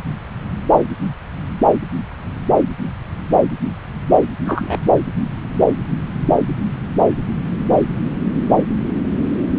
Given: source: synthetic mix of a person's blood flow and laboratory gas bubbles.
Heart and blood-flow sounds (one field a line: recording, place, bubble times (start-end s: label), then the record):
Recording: Doppler ultrasound of blood flow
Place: subclavian vein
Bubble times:
4.45-4.80 s: bubbles
From the record:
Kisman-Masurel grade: 113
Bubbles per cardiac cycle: 1 to 2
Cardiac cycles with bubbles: 1 to 10%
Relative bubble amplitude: loud (0.450 to 0.775)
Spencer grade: 1 (occasional bubble signal discernible with the cardiac motion signal, with majority of cardiac periods free of bubbles)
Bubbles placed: anywhere in the cardiac cycle